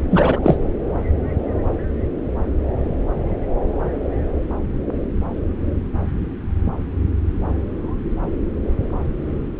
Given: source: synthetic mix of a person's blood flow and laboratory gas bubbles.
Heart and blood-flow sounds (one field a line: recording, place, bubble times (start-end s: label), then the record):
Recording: Doppler ultrasound of blood flow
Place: subclavian vein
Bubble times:
0.11-0.58 s: bubbles
From the record:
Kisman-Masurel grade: 213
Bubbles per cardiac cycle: several, 3 to 8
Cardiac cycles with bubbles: 1 to 10%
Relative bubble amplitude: loud (0.450 to 0.775)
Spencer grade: 1 (occasional bubble signal discernible with the cardiac motion signal, with majority of cardiac periods free of bubbles)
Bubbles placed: anywhere in the cardiac cycle